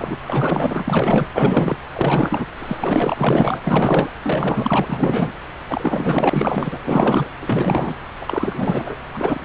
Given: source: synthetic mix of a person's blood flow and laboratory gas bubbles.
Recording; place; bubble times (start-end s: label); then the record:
Doppler ultrasound of blood flow; subclavian vein
0.00-0.17 s: bubbles
0.25-1.27 s: bubbles
1.34-1.77 s: bubbles
1.93-2.46 s: bubbles
2.58-3.14 s: bubbles
3.16-3.60 s: bubbles
3.64-4.09 s: bubbles
4.22-5.32 s: bubbles
5.67-6.80 s: bubbles
6.84-7.29 s: bubbles
7.41-7.94 s: bubbles
8.20-8.95 s: bubbles
9.13-9.45 s: bubbles
From the record:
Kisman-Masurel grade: 444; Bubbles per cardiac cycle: continuous sound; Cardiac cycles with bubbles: 100%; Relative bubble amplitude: maximal (0.775 to 0.999); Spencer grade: 4 (maximum detectable bubble signal sounding continuously throughout systole and diastole of every cardiac period, and overriding the amplitude of the normal cardiac signals); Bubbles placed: anywhere in the cardiac cycle